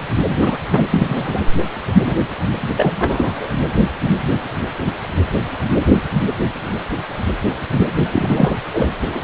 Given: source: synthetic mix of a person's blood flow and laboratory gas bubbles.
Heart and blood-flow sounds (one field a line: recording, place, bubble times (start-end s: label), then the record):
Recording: Doppler ultrasound of blood flow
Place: precordium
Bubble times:
0.29-0.59 s: bubbles
0.72-0.85 s: bubbles
0.91-1.40 s: bubbles
2.06-2.15 s: bubbles
2.77-3.49 s: bubbles
7.79-7.85 s: bubbles
8.12-8.54 s: bubbles
8.72-8.88 s: bubbles
9.05-9.21 s: bubbles
From the record:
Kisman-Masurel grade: 233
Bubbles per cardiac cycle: several, 3 to 8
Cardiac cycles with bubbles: 50 to 99%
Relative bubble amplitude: loud (0.450 to 0.775)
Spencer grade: 3 (all of the cardiac periods contain showers or single bubble signals, but not dominating or overriding the cardiac motion signals)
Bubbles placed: anywhere in the cardiac cycle